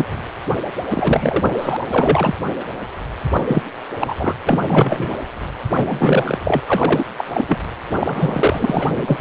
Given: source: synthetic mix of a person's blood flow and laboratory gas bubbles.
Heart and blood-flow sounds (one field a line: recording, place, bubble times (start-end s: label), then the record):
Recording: Doppler ultrasound of blood flow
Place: precordium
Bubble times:
0.00-0.05 s: bubbles
0.90-1.77 s: bubbles
1.81-1.86 s: bubbles
1.90-2.34 s: bubbles
2.46-2.54 s: bubbles
3.31-3.44 s: bubbles
3.48-3.63 s: bubbles
4.00-4.15 s: bubbles
4.19-4.33 s: bubbles
4.46-5.17 s: bubbles
5.66-5.68 s: bubbles
5.74-6.38 s: bubbles
6.45-6.62 s: bubbles
6.67-7.05 s: bubbles
7.17-7.25 s: bubbles
7.33-7.45 s: bubbles
7.48-7.59 s: bubbles
8.00-8.86 s: bubbles
8.90-9.21 s: bubbles
From the record:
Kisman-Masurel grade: 343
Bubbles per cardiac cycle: rolling drumbeat, 9 or more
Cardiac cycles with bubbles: 100%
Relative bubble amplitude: loud (0.450 to 0.775)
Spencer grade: 3 (all of the cardiac periods contain showers or single bubble signals, but not dominating or overriding the cardiac motion signals)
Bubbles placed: anywhere in the cardiac cycle